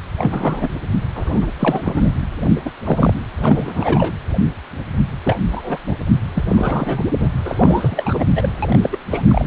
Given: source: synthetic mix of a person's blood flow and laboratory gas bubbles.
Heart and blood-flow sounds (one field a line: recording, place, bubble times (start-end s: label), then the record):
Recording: Doppler ultrasound of blood flow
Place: precordium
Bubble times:
0.18-0.69 s: bubbles
1.15-1.46 s: bubbles
1.59-2.09 s: bubbles
2.45-2.50 s: bubbles
2.54-2.61 s: bubbles
2.65-2.70 s: bubbles
2.84-3.13 s: bubbles
3.37-4.14 s: bubbles
5.25-5.39 s: bubbles
5.51-5.80 s: bubbles
5.87-5.96 s: bubbles
6.33-6.44 s: bubbles
6.48-7.07 s: bubbles
7.18-7.30 s: bubbles
7.45-8.24 s: bubbles
8.35-8.49 s: bubbles
8.62-8.79 s: bubbles
8.83-8.97 s: bubbles
9.10-9.22 s: bubbles
9.28-9.45 s: bubbles
From the record:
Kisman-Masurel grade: 232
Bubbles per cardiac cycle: several, 3 to 8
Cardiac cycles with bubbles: 50 to 99%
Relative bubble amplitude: moderate (0.250 to 0.450)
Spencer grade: 3 (all of the cardiac periods contain showers or single bubble signals, but not dominating or overriding the cardiac motion signals)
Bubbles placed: anywhere in the cardiac cycle